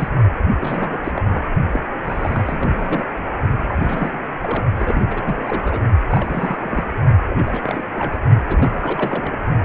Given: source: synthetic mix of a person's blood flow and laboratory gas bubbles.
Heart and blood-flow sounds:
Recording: Doppler ultrasound of blood flow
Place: precordium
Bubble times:
0.00-0.08 s: bubbles
0.46-1.01 s: bubbles
1.03-1.12 s: bubbles
1.16-1.22 s: bubbles
1.28-1.48 s: bubbles
1.72-1.80 s: bubbles
2.04-3.04 s: bubbles
3.68-4.17 s: bubbles
4.42-4.64 s: bubbles
4.76-5.22 s: bubbles
5.24-5.82 s: bubbles
6.09-6.84 s: bubbles
7.29-7.81 s: bubbles
7.95-8.18 s: bubbles
8.47-9.36 s: bubbles
From the record:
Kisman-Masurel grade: 342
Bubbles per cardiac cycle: rolling drumbeat, 9 or more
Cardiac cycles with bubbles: 100%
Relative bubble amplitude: moderate (0.250 to 0.450)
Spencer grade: 3 (all of the cardiac periods contain showers or single bubble signals, but not dominating or overriding the cardiac motion signals)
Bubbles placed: only in the low amplitude regions of the cardiac cycle

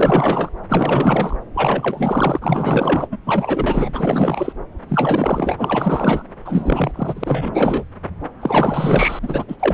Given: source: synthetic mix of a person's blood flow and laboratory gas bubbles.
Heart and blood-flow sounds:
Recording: Doppler ultrasound of blood flow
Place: subclavian vein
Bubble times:
0.00-0.50 s: bubbles
0.69-1.36 s: bubbles
1.53-3.07 s: bubbles
3.11-3.17 s: bubbles
3.26-4.53 s: bubbles
4.88-6.23 s: bubbles
6.45-6.92 s: bubbles
6.96-7.84 s: bubbles
8.42-9.19 s: bubbles
9.22-9.44 s: bubbles
9.47-9.56 s: bubbles
9.59-9.74 s: bubbles
From the record:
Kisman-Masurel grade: 444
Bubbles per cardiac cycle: continuous sound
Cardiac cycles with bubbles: 100%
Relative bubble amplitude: maximal (0.775 to 0.999)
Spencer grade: 4 (maximum detectable bubble signal sounding continuously throughout systole and diastole of every cardiac period, and overriding the amplitude of the normal cardiac signals)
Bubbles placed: anywhere in the cardiac cycle

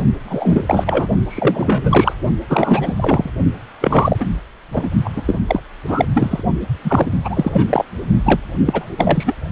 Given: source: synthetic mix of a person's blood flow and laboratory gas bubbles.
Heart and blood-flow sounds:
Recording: Doppler ultrasound of blood flow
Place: precordium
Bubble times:
0.23-1.07 s: bubbles
1.27-2.13 s: bubbles
2.49-3.30 s: bubbles
3.80-4.26 s: bubbles
4.71-4.90 s: bubbles
5.04-5.11 s: bubbles
5.16-5.22 s: bubbles
5.25-5.39 s: bubbles
5.48-5.61 s: bubbles
5.88-6.05 s: bubbles
6.15-6.43 s: bubbles
6.83-7.06 s: bubbles
7.24-7.85 s: bubbles
8.25-8.40 s: bubbles
8.65-8.87 s: bubbles
8.97-9.34 s: bubbles
From the record:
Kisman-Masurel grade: 343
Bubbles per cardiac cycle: rolling drumbeat, 9 or more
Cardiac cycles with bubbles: 100%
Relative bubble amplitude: loud (0.450 to 0.775)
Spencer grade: 3 (all of the cardiac periods contain showers or single bubble signals, but not dominating or overriding the cardiac motion signals)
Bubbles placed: only in the low amplitude regions of the cardiac cycle

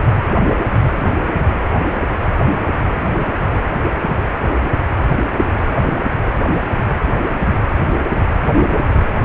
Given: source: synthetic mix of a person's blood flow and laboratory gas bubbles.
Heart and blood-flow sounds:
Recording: Doppler ultrasound of blood flow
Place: precordium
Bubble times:
9.21-9.25 s: bubbles
From the record:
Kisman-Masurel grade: 211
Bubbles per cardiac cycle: several, 3 to 8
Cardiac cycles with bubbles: 1 to 10%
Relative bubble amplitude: barely perceptible (0.100 to 0.250)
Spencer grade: 1 (occasional bubble signal discernible with the cardiac motion signal, with majority of cardiac periods free of bubbles)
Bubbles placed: anywhere in the cardiac cycle

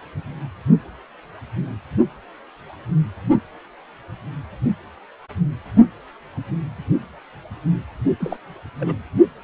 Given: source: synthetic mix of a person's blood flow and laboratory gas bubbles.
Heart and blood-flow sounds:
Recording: Doppler ultrasound of blood flow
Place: precordium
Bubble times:
8.20-8.37 s: bubbles
8.79-8.96 s: bubbles
From the record:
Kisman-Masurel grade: 221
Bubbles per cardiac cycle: several, 3 to 8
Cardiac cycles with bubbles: 10 to 50%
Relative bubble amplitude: barely perceptible (0.100 to 0.250)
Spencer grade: 2 (many but less than half of the cardiac periods contain bubble signals, singularly or in groups)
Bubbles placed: only in the low amplitude regions of the cardiac cycle

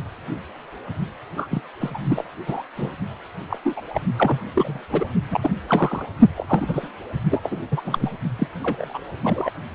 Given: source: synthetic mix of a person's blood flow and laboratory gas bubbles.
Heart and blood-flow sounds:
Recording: Doppler ultrasound of blood flow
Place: precordium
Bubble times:
1.37-1.48 s: bubbles
1.51-1.61 s: bubbles
1.81-1.91 s: bubbles
1.94-1.99 s: bubbles
2.03-2.24 s: bubbles
2.46-2.62 s: bubbles
2.76-2.92 s: bubbles
3.50-3.58 s: bubbles
3.64-3.81 s: bubbles
3.88-4.01 s: bubbles
4.17-4.39 s: bubbles
4.54-4.79 s: bubbles
4.90-5.04 s: bubbles
5.30-5.50 s: bubbles
5.68-6.05 s: bubbles
6.35-6.88 s: bubbles
7.30-7.58 s: bubbles
7.71-7.82 s: bubbles
7.85-8.11 s: bubbles
8.38-8.47 s: bubbles
8.63-8.98 s: bubbles
9.23-9.50 s: bubbles
From the record:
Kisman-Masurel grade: 232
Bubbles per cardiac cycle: several, 3 to 8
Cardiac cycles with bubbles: 50 to 99%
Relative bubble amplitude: moderate (0.250 to 0.450)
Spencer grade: 3 (all of the cardiac periods contain showers or single bubble signals, but not dominating or overriding the cardiac motion signals)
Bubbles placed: only in the low amplitude regions of the cardiac cycle

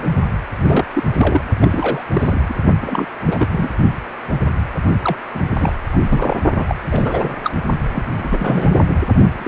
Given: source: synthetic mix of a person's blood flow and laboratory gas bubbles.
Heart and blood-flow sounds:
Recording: Doppler ultrasound of blood flow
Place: precordium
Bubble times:
0.00-0.06 s: bubbles
0.59-0.84 s: bubbles
0.93-1.04 s: bubbles
1.14-1.44 s: bubbles
1.61-2.02 s: bubbles
2.10-2.55 s: bubbles
2.81-3.06 s: bubbles
3.26-3.47 s: bubbles
3.51-3.71 s: bubbles
5.02-5.17 s: bubbles
5.33-5.40 s: bubbles
5.57-5.73 s: bubbles
5.92-5.97 s: bubbles
6.08-6.37 s: bubbles
6.57-6.65 s: bubbles
6.68-6.75 s: bubbles
6.91-7.35 s: bubbles
7.44-7.51 s: bubbles
7.92-9.00 s: bubbles
9.38-9.48 s: bubbles
From the record:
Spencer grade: 3 (all of the cardiac periods contain showers or single bubble signals, but not dominating or overriding the cardiac motion signals)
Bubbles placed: only in the low amplitude regions of the cardiac cycle

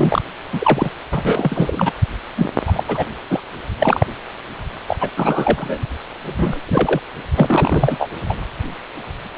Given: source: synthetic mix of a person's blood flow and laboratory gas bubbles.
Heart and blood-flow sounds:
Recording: Doppler ultrasound of blood flow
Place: precordium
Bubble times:
0.00-0.22 s: bubbles
0.52-0.90 s: bubbles
1.11-1.22 s: bubbles
1.25-1.93 s: bubbles
2.37-2.50 s: bubbles
2.66-2.83 s: bubbles
2.88-3.05 s: bubbles
3.30-3.40 s: bubbles
3.78-4.06 s: bubbles
4.87-4.96 s: bubbles
5.00-5.09 s: bubbles
5.17-5.84 s: bubbles
6.23-6.61 s: bubbles
6.67-7.00 s: bubbles
7.36-8.10 s: bubbles
8.29-8.34 s: bubbles
From the record:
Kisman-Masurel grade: 333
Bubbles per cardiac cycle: rolling drumbeat, 9 or more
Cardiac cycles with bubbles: 50 to 99%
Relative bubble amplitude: loud (0.450 to 0.775)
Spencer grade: 3 (all of the cardiac periods contain showers or single bubble signals, but not dominating or overriding the cardiac motion signals)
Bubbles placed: anywhere in the cardiac cycle

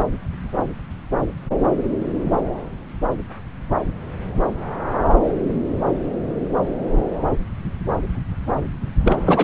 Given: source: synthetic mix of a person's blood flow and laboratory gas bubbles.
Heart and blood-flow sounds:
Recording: Doppler ultrasound of blood flow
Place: subclavian vein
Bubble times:
9.04-9.17 s: bubbles
9.25-9.44 s: bubbles
From the record:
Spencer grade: 1 (occasional bubble signal discernible with the cardiac motion signal, with majority of cardiac periods free of bubbles)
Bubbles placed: anywhere in the cardiac cycle

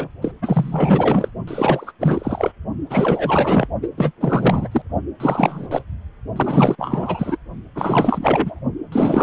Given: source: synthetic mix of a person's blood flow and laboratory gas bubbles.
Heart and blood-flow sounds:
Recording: Doppler ultrasound of blood flow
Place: precordium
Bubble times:
0.00-0.08 s: bubbles
0.22-0.33 s: bubbles
0.41-1.31 s: bubbles
1.47-1.92 s: bubbles
2.00-2.52 s: bubbles
2.90-3.68 s: bubbles
3.82-3.88 s: bubbles
3.98-4.11 s: bubbles
4.20-4.68 s: bubbles
4.71-4.82 s: bubbles
5.20-5.67 s: bubbles
5.70-5.82 s: bubbles
6.35-6.75 s: bubbles
6.78-7.38 s: bubbles
7.75-8.60 s: bubbles
8.92-9.23 s: bubbles
From the record:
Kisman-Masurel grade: 444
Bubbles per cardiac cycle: continuous sound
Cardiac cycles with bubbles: 100%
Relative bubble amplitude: maximal (0.775 to 0.999)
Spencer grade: 4 (maximum detectable bubble signal sounding continuously throughout systole and diastole of every cardiac period, and overriding the amplitude of the normal cardiac signals)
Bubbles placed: only in the low amplitude regions of the cardiac cycle

